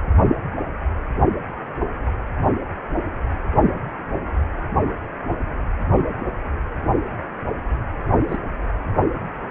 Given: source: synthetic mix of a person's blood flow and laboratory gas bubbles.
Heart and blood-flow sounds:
Doppler ultrasound of blood flow; precordium
8.27-8.37 s: bubbles
From the record:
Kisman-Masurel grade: 112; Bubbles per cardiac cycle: 1 to 2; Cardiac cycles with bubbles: 1 to 10%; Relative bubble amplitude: moderate (0.250 to 0.450); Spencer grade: 1 (occasional bubble signal discernible with the cardiac motion signal, with majority of cardiac periods free of bubbles); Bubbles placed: only in the low amplitude regions of the cardiac cycle

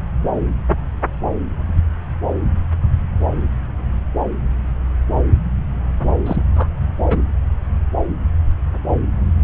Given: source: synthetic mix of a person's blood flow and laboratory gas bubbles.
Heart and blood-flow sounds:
Doppler ultrasound of blood flow; subclavian vein
6.26-6.43 s: bubbles
6.55-6.68 s: bubbles
7.09-7.17 s: bubbles
From the record:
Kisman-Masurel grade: 212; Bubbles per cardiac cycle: several, 3 to 8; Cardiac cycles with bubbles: 1 to 10%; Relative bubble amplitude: moderate (0.250 to 0.450); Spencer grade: 1 (occasional bubble signal discernible with the cardiac motion signal, with majority of cardiac periods free of bubbles); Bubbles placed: anywhere in the cardiac cycle

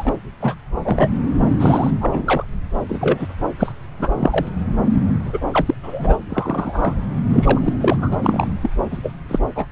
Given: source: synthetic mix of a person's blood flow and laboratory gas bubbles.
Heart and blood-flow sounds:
Doppler ultrasound of blood flow; subclavian vein
0.00-0.13 s: bubbles
0.40-0.55 s: bubbles
0.82-1.10 s: bubbles
1.60-1.91 s: bubbles
2.00-2.45 s: bubbles
2.89-3.27 s: bubbles
3.59-3.72 s: bubbles
4.00-4.09 s: bubbles
4.15-4.46 s: bubbles
5.25-5.41 s: bubbles
5.50-5.62 s: bubbles
5.66-5.74 s: bubbles
5.83-6.17 s: bubbles
6.29-6.96 s: bubbles
7.29-8.15 s: bubbles
8.22-8.47 s: bubbles
8.61-8.70 s: bubbles
8.90-8.97 s: bubbles
9.02-9.13 s: bubbles
9.28-9.39 s: bubbles
9.55-9.66 s: bubbles
From the record:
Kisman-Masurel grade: 243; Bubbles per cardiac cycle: several, 3 to 8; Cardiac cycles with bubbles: 100%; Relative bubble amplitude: loud (0.450 to 0.775); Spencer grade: 3 (all of the cardiac periods contain showers or single bubble signals, but not dominating or overriding the cardiac motion signals); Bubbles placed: anywhere in the cardiac cycle

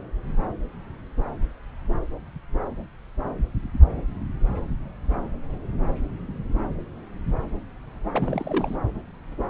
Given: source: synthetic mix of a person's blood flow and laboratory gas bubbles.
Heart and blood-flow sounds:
Doppler ultrasound of blood flow; subclavian vein
8.13-8.78 s: bubbles
From the record:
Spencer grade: 1 (occasional bubble signal discernible with the cardiac motion signal, with majority of cardiac periods free of bubbles); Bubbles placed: anywhere in the cardiac cycle

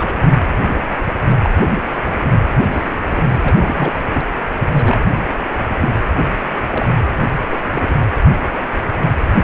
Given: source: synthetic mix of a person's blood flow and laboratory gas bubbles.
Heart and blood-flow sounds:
Doppler ultrasound of blood flow; precordium
0.00-0.32 s: bubbles
1.42-1.50 s: bubbles
1.59-1.68 s: bubbles
2.56-2.98 s: bubbles
3.10-3.39 s: bubbles
3.44-4.00 s: bubbles
4.14-4.22 s: bubbles
4.69-4.97 s: bubbles
5.78-5.90 s: bubbles
6.27-6.38 s: bubbles
6.70-6.89 s: bubbles
7.18-7.27 s: bubbles
7.50-7.61 s: bubbles
7.73-7.99 s: bubbles
From the record:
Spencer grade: 3 (all of the cardiac periods contain showers or single bubble signals, but not dominating or overriding the cardiac motion signals); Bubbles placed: anywhere in the cardiac cycle

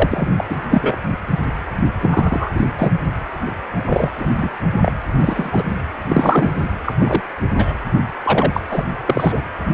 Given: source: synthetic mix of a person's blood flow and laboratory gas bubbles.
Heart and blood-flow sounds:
Doppler ultrasound of blood flow; precordium
0.00-0.44 s: bubbles
0.48-0.56 s: bubbles
0.70-0.99 s: bubbles
2.00-2.50 s: bubbles
2.54-2.71 s: bubbles
2.79-2.93 s: bubbles
3.72-3.83 s: bubbles
3.85-4.11 s: bubbles
4.17-4.26 s: bubbles
4.36-4.53 s: bubbles
4.82-4.92 s: bubbles
5.20-5.63 s: bubbles
6.09-6.76 s: bubbles
6.86-6.92 s: bubbles
7.00-7.21 s: bubbles
7.54-7.75 s: bubbles
8.23-8.60 s: bubbles
8.70-8.84 s: bubbles
9.05-9.42 s: bubbles
From the record:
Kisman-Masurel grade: 243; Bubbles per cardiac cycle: several, 3 to 8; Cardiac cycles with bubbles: 100%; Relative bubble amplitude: loud (0.450 to 0.775); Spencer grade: 3 (all of the cardiac periods contain showers or single bubble signals, but not dominating or overriding the cardiac motion signals); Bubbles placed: anywhere in the cardiac cycle

